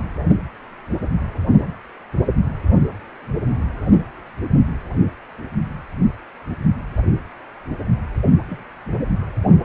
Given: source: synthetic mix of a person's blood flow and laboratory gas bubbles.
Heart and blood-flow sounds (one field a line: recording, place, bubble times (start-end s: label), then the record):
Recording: Doppler ultrasound of blood flow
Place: precordium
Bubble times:
8.47-8.63 s: bubbles
From the record:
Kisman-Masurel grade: 111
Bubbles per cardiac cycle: 1 to 2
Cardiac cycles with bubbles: 1 to 10%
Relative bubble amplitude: barely perceptible (0.100 to 0.250)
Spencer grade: 1 (occasional bubble signal discernible with the cardiac motion signal, with majority of cardiac periods free of bubbles)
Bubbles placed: anywhere in the cardiac cycle